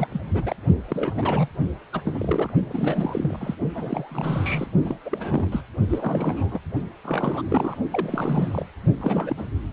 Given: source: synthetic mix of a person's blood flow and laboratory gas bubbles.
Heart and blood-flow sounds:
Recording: Doppler ultrasound of blood flow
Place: precordium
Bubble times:
0.00-0.07 s: bubbles
0.12-0.21 s: bubbles
0.27-0.56 s: bubbles
0.88-1.48 s: bubbles
1.93-2.52 s: bubbles
2.68-3.55 s: bubbles
3.73-4.68 s: bubbles
4.84-4.99 s: bubbles
5.05-5.64 s: bubbles
5.89-6.59 s: bubbles
7.04-7.42 s: bubbles
7.45-7.79 s: bubbles
7.92-8.66 s: bubbles
9.01-9.44 s: bubbles
From the record:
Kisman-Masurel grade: 342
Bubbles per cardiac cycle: rolling drumbeat, 9 or more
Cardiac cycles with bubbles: 100%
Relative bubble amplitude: moderate (0.250 to 0.450)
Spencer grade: 3 (all of the cardiac periods contain showers or single bubble signals, but not dominating or overriding the cardiac motion signals)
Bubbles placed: only in the low amplitude regions of the cardiac cycle

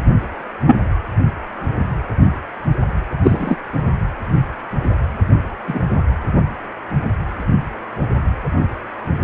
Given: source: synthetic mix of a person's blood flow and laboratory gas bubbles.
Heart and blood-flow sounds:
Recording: Doppler ultrasound of blood flow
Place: precordium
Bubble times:
0.66-0.75 s: bubbles
3.23-3.56 s: bubbles
5.67-5.79 s: bubbles
From the record:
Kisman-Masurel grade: 123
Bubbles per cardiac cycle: 1 to 2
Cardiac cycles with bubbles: 10 to 50%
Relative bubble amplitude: loud (0.450 to 0.775)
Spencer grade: 2 (many but less than half of the cardiac periods contain bubble signals, singularly or in groups)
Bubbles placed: only in the low amplitude regions of the cardiac cycle

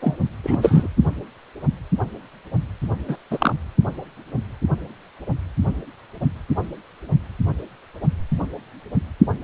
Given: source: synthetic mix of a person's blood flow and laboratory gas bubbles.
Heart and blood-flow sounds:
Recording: Doppler ultrasound of blood flow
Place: precordium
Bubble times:
0.00-0.16 s: bubbles
0.43-0.88 s: bubbles
3.08-3.18 s: bubbles
3.31-3.54 s: bubbles
From the record:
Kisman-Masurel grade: 223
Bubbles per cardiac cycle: several, 3 to 8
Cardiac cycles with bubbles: 10 to 50%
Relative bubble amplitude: loud (0.450 to 0.775)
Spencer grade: 2 (many but less than half of the cardiac periods contain bubble signals, singularly or in groups)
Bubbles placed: only in the low amplitude regions of the cardiac cycle

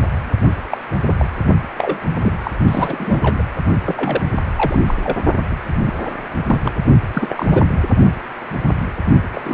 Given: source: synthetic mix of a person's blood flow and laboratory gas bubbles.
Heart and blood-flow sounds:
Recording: Doppler ultrasound of blood flow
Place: precordium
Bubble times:
0.69-0.77 s: bubbles
1.05-1.14 s: bubbles
1.17-1.28 s: bubbles
1.78-1.99 s: bubbles
2.02-2.52 s: bubbles
2.68-3.42 s: bubbles
3.86-4.25 s: bubbles
4.56-4.83 s: bubbles
4.87-4.94 s: bubbles
5.04-5.17 s: bubbles
5.51-5.57 s: bubbles
5.85-5.94 s: bubbles
6.05-6.12 s: bubbles
6.46-6.60 s: bubbles
6.63-6.71 s: bubbles
7.13-7.64 s: bubbles
9.32-9.41 s: bubbles
9.44-9.54 s: bubbles
From the record:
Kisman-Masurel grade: 232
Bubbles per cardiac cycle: several, 3 to 8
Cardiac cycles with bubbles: 50 to 99%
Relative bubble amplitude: moderate (0.250 to 0.450)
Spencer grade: 3 (all of the cardiac periods contain showers or single bubble signals, but not dominating or overriding the cardiac motion signals)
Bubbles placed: only in the low amplitude regions of the cardiac cycle

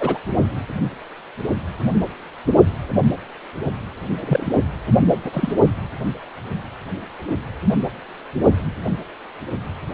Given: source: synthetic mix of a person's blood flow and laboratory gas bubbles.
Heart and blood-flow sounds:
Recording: Doppler ultrasound of blood flow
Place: precordium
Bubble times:
0.00-0.18 s: bubbles
4.19-4.58 s: bubbles
5.25-5.53 s: bubbles
From the record:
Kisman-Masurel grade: 122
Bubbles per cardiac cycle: 1 to 2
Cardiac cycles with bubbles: 10 to 50%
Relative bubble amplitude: moderate (0.250 to 0.450)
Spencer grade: 2 (many but less than half of the cardiac periods contain bubble signals, singularly or in groups)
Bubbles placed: only in the low amplitude regions of the cardiac cycle

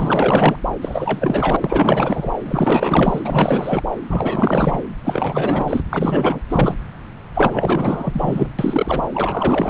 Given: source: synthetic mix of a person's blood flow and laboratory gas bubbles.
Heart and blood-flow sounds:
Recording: Doppler ultrasound of blood flow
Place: subclavian vein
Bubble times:
0.00-0.56 s: bubbles
0.81-1.56 s: bubbles
1.60-2.31 s: bubbles
2.46-3.83 s: bubbles
4.08-4.82 s: bubbles
5.04-5.80 s: bubbles
5.90-6.41 s: bubbles
6.49-6.75 s: bubbles
7.34-8.53 s: bubbles
8.58-9.08 s: bubbles
9.13-9.70 s: bubbles
From the record:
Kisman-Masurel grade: 444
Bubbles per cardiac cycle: continuous sound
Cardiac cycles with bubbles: 100%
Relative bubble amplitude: maximal (0.775 to 0.999)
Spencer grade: 4 (maximum detectable bubble signal sounding continuously throughout systole and diastole of every cardiac period, and overriding the amplitude of the normal cardiac signals)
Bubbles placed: anywhere in the cardiac cycle

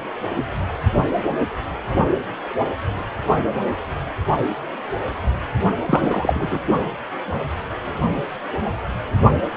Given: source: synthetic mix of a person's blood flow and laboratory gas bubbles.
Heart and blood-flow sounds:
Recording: Doppler ultrasound of blood flow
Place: precordium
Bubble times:
5.86-6.58 s: bubbles
From the record:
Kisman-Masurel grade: 213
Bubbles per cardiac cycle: several, 3 to 8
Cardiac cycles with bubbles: 1 to 10%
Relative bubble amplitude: loud (0.450 to 0.775)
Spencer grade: 1 (occasional bubble signal discernible with the cardiac motion signal, with majority of cardiac periods free of bubbles)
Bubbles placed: only in the low amplitude regions of the cardiac cycle

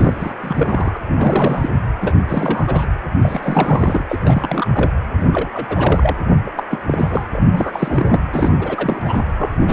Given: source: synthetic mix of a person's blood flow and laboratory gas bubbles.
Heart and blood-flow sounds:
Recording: Doppler ultrasound of blood flow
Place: precordium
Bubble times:
0.00-0.14 s: bubbles
0.18-0.33 s: bubbles
0.40-0.98 s: bubbles
1.08-1.70 s: bubbles
2.01-2.17 s: bubbles
2.29-2.86 s: bubbles
3.21-4.04 s: bubbles
4.09-4.67 s: bubbles
4.74-4.91 s: bubbles
5.17-6.16 s: bubbles
6.46-6.50 s: bubbles
6.55-6.63 s: bubbles
6.70-6.81 s: bubbles
6.87-7.26 s: bubbles
7.32-8.20 s: bubbles
8.32-8.52 s: bubbles
8.59-9.22 s: bubbles
9.37-9.54 s: bubbles
9.60-9.73 s: bubbles
From the record:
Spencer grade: 3 (all of the cardiac periods contain showers or single bubble signals, but not dominating or overriding the cardiac motion signals)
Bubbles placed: anywhere in the cardiac cycle

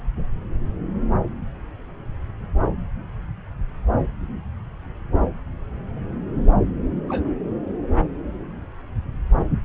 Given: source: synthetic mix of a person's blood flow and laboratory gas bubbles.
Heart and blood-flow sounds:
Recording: Doppler ultrasound of blood flow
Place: subclavian vein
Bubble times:
7.08-7.32 s: bubbles
From the record:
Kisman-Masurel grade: 112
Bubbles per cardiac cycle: 1 to 2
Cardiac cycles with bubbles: 1 to 10%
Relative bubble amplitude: moderate (0.250 to 0.450)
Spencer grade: 1 (occasional bubble signal discernible with the cardiac motion signal, with majority of cardiac periods free of bubbles)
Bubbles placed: anywhere in the cardiac cycle

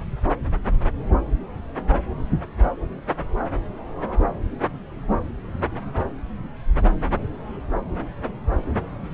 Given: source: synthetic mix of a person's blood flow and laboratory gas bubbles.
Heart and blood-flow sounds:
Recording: Doppler ultrasound of blood flow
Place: subclavian vein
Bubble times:
no bubbles
From the record:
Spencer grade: 0 (complete lack of bubble signals)

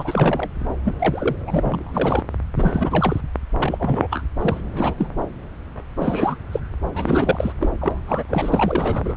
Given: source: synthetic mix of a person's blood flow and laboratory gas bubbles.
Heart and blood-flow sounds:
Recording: Doppler ultrasound of blood flow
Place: subclavian vein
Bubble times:
0.00-0.49 s: bubbles
0.84-0.95 s: bubbles
0.99-1.36 s: bubbles
1.47-2.23 s: bubbles
2.56-3.21 s: bubbles
3.59-4.07 s: bubbles
4.11-4.23 s: bubbles
4.41-4.61 s: bubbles
4.72-4.94 s: bubbles
4.97-5.07 s: bubbles
5.97-6.36 s: bubbles
6.51-6.60 s: bubbles
6.93-7.53 s: bubbles
7.60-7.68 s: bubbles
7.81-8.01 s: bubbles
8.07-8.23 s: bubbles
8.27-9.16 s: bubbles
From the record:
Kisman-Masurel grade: 332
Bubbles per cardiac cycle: rolling drumbeat, 9 or more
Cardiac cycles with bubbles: 50 to 99%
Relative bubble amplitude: moderate (0.250 to 0.450)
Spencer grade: 3 (all of the cardiac periods contain showers or single bubble signals, but not dominating or overriding the cardiac motion signals)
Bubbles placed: anywhere in the cardiac cycle

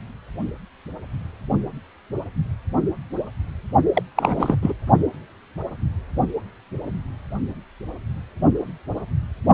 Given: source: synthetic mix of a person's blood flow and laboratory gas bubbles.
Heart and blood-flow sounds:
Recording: Doppler ultrasound of blood flow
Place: precordium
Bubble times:
3.94-4.02 s: bubbles
4.16-4.55 s: bubbles
4.62-4.74 s: bubbles
From the record:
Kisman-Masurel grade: 212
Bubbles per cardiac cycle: several, 3 to 8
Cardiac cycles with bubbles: 1 to 10%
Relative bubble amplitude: moderate (0.250 to 0.450)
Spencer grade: 1 (occasional bubble signal discernible with the cardiac motion signal, with majority of cardiac periods free of bubbles)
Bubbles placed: only in the low amplitude regions of the cardiac cycle

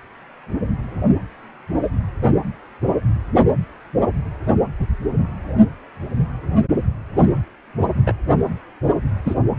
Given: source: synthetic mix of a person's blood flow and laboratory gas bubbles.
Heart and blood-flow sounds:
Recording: Doppler ultrasound of blood flow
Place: precordium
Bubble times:
8.06-8.13 s: bubbles
9.25-9.35 s: bubbles
From the record:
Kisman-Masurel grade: 113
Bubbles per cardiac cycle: 1 to 2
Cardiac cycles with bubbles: 1 to 10%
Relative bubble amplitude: loud (0.450 to 0.775)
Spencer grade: 1 (occasional bubble signal discernible with the cardiac motion signal, with majority of cardiac periods free of bubbles)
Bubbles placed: only in the low amplitude regions of the cardiac cycle

